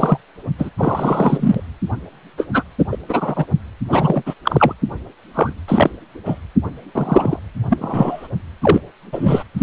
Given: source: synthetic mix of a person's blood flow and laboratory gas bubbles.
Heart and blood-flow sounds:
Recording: Doppler ultrasound of blood flow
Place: precordium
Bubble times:
0.00-0.17 s: bubbles
0.58-0.69 s: bubbles
0.77-1.61 s: bubbles
2.38-2.46 s: bubbles
2.53-2.63 s: bubbles
2.79-2.85 s: bubbles
2.91-2.97 s: bubbles
3.08-3.46 s: bubbles
3.89-4.22 s: bubbles
4.26-4.34 s: bubbles
4.44-4.74 s: bubbles
5.34-5.53 s: bubbles
5.68-5.91 s: bubbles
6.25-6.38 s: bubbles
6.95-7.40 s: bubbles
7.70-8.28 s: bubbles
8.62-8.80 s: bubbles
9.12-9.44 s: bubbles
9.57-9.63 s: bubbles
From the record:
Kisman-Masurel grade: 243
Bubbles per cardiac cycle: several, 3 to 8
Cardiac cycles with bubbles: 100%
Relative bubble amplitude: loud (0.450 to 0.775)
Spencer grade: 3 (all of the cardiac periods contain showers or single bubble signals, but not dominating or overriding the cardiac motion signals)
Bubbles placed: anywhere in the cardiac cycle

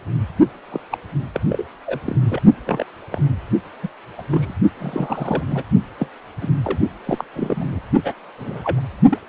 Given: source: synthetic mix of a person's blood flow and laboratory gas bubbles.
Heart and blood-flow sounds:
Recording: Doppler ultrasound of blood flow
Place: precordium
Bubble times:
0.71-0.80 s: bubbles
0.91-0.98 s: bubbles
1.34-1.40 s: bubbles
1.50-1.65 s: bubbles
1.86-1.99 s: bubbles
2.04-2.16 s: bubbles
2.25-2.40 s: bubbles
2.66-2.84 s: bubbles
3.11-3.21 s: bubbles
3.83-3.88 s: bubbles
4.17-4.23 s: bubbles
4.30-4.55 s: bubbles
4.79-5.43 s: bubbles
5.46-5.63 s: bubbles
5.99-6.08 s: bubbles
6.41-6.48 s: bubbles
6.63-6.79 s: bubbles
7.05-7.25 s: bubbles
7.35-7.80 s: bubbles
8.04-8.13 s: bubbles
8.38-8.81 s: bubbles
9.11-9.19 s: bubbles
From the record:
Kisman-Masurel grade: 232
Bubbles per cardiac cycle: several, 3 to 8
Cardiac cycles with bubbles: 50 to 99%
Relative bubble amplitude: moderate (0.250 to 0.450)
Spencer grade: 3 (all of the cardiac periods contain showers or single bubble signals, but not dominating or overriding the cardiac motion signals)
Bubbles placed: only in the low amplitude regions of the cardiac cycle

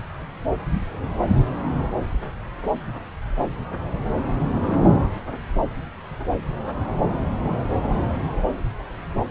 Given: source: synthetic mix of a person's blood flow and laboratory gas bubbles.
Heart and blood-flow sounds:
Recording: Doppler ultrasound of blood flow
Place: subclavian vein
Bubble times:
no bubbles
From the record:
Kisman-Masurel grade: 000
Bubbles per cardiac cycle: 0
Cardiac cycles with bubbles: 0%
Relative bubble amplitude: no bubbles discernible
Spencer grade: 0 (complete lack of bubble signals)

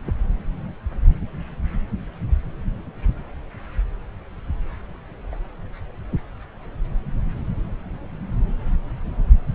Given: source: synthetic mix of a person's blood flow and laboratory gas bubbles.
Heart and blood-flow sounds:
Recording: Doppler ultrasound of blood flow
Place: subclavian vein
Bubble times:
0.04-0.14 s: bubbles
5.31-5.35 s: bubbles
From the record:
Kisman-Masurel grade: 121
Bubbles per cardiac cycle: 1 to 2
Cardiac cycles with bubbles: 10 to 50%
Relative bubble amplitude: barely perceptible (0.100 to 0.250)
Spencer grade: 2 (many but less than half of the cardiac periods contain bubble signals, singularly or in groups)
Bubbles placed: anywhere in the cardiac cycle

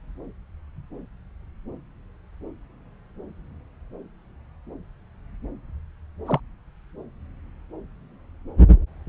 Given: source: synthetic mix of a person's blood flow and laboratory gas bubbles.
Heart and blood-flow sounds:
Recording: Doppler ultrasound of blood flow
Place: subclavian vein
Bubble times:
6.26-6.39 s: bubbles
From the record:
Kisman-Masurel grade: 112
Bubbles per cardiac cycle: 1 to 2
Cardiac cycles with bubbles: 1 to 10%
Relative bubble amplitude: moderate (0.250 to 0.450)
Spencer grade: 1 (occasional bubble signal discernible with the cardiac motion signal, with majority of cardiac periods free of bubbles)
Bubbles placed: anywhere in the cardiac cycle

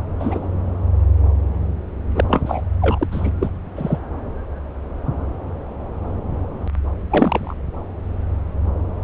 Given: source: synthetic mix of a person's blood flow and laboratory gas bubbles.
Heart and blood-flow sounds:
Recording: Doppler ultrasound of blood flow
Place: subclavian vein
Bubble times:
0.20-0.48 s: bubbles
2.15-2.24 s: bubbles
2.27-2.62 s: bubbles
2.81-3.07 s: bubbles
3.11-3.31 s: bubbles
3.39-3.50 s: bubbles
3.75-3.97 s: bubbles
7.09-7.54 s: bubbles
From the record:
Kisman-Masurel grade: 223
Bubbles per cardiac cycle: several, 3 to 8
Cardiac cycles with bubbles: 10 to 50%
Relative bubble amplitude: loud (0.450 to 0.775)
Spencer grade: 2 (many but less than half of the cardiac periods contain bubble signals, singularly or in groups)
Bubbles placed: anywhere in the cardiac cycle

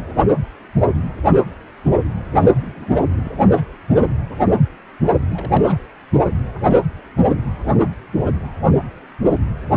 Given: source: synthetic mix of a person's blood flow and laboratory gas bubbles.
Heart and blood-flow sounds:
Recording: Doppler ultrasound of blood flow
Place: precordium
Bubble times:
2.54-3.00 s: bubbles
3.17-3.31 s: bubbles
3.54-3.62 s: bubbles
5.30-5.79 s: bubbles
From the record:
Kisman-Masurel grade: 221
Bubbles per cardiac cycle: several, 3 to 8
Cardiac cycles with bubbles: 10 to 50%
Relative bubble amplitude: barely perceptible (0.100 to 0.250)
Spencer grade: 2 (many but less than half of the cardiac periods contain bubble signals, singularly or in groups)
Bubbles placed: only in the low amplitude regions of the cardiac cycle

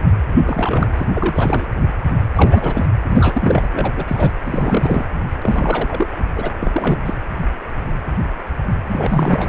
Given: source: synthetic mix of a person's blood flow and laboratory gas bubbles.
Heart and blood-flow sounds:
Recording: Doppler ultrasound of blood flow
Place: precordium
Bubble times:
0.36-1.05 s: bubbles
1.13-1.70 s: bubbles
2.34-2.86 s: bubbles
3.04-3.68 s: bubbles
3.71-3.92 s: bubbles
3.96-4.31 s: bubbles
4.45-5.04 s: bubbles
5.42-6.08 s: bubbles
6.35-6.50 s: bubbles
6.60-6.99 s: bubbles
7.05-7.14 s: bubbles
8.88-9.49 s: bubbles
From the record:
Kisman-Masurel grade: 332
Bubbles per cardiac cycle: rolling drumbeat, 9 or more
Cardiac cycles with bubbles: 50 to 99%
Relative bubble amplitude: moderate (0.250 to 0.450)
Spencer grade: 3 (all of the cardiac periods contain showers or single bubble signals, but not dominating or overriding the cardiac motion signals)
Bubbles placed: anywhere in the cardiac cycle

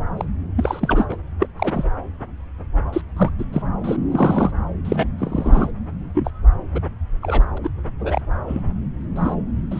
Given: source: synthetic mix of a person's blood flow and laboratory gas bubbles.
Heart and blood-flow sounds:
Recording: Doppler ultrasound of blood flow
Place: subclavian vein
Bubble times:
0.17-0.25 s: bubbles
0.56-1.05 s: bubbles
1.08-1.17 s: bubbles
1.39-1.47 s: bubbles
1.58-1.85 s: bubbles
2.92-3.02 s: bubbles
3.17-3.33 s: bubbles
3.38-3.44 s: bubbles
3.52-3.62 s: bubbles
3.84-3.97 s: bubbles
4.10-4.52 s: bubbles
4.85-5.05 s: bubbles
5.18-5.71 s: bubbles
6.14-6.31 s: bubbles
6.75-6.80 s: bubbles
7.22-7.46 s: bubbles
7.57-7.58 s: bubbles
7.63-7.68 s: bubbles
8.00-8.21 s: bubbles
8.47-8.62 s: bubbles
9.15-9.35 s: bubbles
9.71-9.79 s: bubbles
From the record:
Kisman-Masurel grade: 242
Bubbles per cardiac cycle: several, 3 to 8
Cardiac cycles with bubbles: 100%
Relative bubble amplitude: moderate (0.250 to 0.450)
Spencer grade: 3 (all of the cardiac periods contain showers or single bubble signals, but not dominating or overriding the cardiac motion signals)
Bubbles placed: anywhere in the cardiac cycle

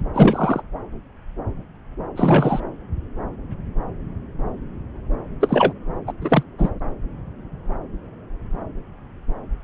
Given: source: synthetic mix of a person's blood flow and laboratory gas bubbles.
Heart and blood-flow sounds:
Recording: Doppler ultrasound of blood flow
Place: subclavian vein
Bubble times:
0.14-0.62 s: bubbles
2.15-2.60 s: bubbles
5.41-5.73 s: bubbles
6.07-6.12 s: bubbles
6.21-6.43 s: bubbles
6.58-6.70 s: bubbles
From the record:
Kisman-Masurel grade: 223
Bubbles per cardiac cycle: several, 3 to 8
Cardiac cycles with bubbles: 10 to 50%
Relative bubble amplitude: loud (0.450 to 0.775)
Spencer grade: 2 (many but less than half of the cardiac periods contain bubble signals, singularly or in groups)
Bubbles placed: anywhere in the cardiac cycle

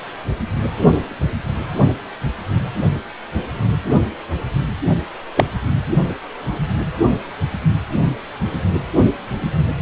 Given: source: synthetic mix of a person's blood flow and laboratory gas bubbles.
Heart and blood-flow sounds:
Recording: Doppler ultrasound of blood flow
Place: precordium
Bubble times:
5.37-5.46 s: bubbles
From the record:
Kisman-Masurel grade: 113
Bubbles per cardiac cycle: 1 to 2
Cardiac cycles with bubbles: 1 to 10%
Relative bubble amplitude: loud (0.450 to 0.775)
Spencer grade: 1 (occasional bubble signal discernible with the cardiac motion signal, with majority of cardiac periods free of bubbles)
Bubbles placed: only in the low amplitude regions of the cardiac cycle

